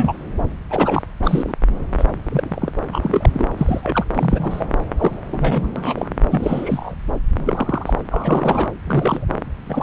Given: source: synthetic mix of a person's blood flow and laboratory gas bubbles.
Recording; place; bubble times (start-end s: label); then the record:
Doppler ultrasound of blood flow; subclavian vein
0.00-0.13 s: bubbles
0.70-1.02 s: bubbles
1.23-1.54 s: bubbles
1.98-2.05 s: bubbles
2.24-2.72 s: bubbles
2.93-3.48 s: bubbles
3.57-4.05 s: bubbles
4.15-4.67 s: bubbles
4.99-5.19 s: bubbles
5.27-5.72 s: bubbles
5.75-6.11 s: bubbles
6.31-6.95 s: bubbles
7.46-7.94 s: bubbles
8.11-8.68 s: bubbles
8.87-9.25 s: bubbles
9.66-9.83 s: bubbles
From the record:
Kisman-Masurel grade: 242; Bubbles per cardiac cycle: several, 3 to 8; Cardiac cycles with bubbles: 100%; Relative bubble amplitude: moderate (0.250 to 0.450); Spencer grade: 3 (all of the cardiac periods contain showers or single bubble signals, but not dominating or overriding the cardiac motion signals); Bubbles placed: anywhere in the cardiac cycle